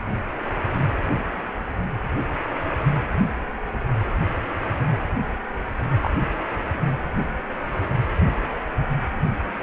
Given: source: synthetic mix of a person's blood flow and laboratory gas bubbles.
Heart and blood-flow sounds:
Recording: Doppler ultrasound of blood flow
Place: precordium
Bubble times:
6.01-6.12 s: bubbles
6.21-6.26 s: bubbles
From the record:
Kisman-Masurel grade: 113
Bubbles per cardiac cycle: 1 to 2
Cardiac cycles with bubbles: 1 to 10%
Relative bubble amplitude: loud (0.450 to 0.775)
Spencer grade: 1 (occasional bubble signal discernible with the cardiac motion signal, with majority of cardiac periods free of bubbles)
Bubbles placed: anywhere in the cardiac cycle

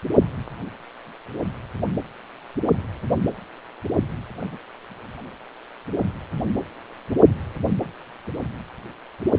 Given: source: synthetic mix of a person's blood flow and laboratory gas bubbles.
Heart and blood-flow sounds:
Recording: Doppler ultrasound of blood flow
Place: precordium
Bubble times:
4.40-4.58 s: bubbles
From the record:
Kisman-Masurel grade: 111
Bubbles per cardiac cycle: 1 to 2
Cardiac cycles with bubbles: 1 to 10%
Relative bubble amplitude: barely perceptible (0.100 to 0.250)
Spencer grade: 1 (occasional bubble signal discernible with the cardiac motion signal, with majority of cardiac periods free of bubbles)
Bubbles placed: anywhere in the cardiac cycle

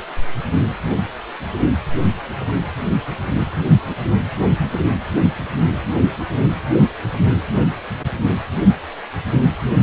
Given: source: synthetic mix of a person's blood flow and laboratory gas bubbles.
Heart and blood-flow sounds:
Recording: Doppler ultrasound of blood flow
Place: precordium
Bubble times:
no bubbles
From the record:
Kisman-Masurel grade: 000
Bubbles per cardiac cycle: 0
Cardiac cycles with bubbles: 0%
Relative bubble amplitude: no bubbles discernible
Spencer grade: 0 (complete lack of bubble signals)

